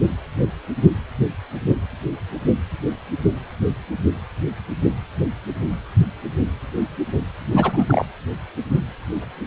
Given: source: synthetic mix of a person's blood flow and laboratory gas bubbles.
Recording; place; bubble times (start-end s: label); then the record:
Doppler ultrasound of blood flow; precordium
7.44-7.84 s: bubbles
7.87-8.05 s: bubbles
From the record:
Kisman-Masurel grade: 213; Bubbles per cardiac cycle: several, 3 to 8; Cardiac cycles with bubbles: 1 to 10%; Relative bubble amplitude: loud (0.450 to 0.775); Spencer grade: 1 (occasional bubble signal discernible with the cardiac motion signal, with majority of cardiac periods free of bubbles); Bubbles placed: anywhere in the cardiac cycle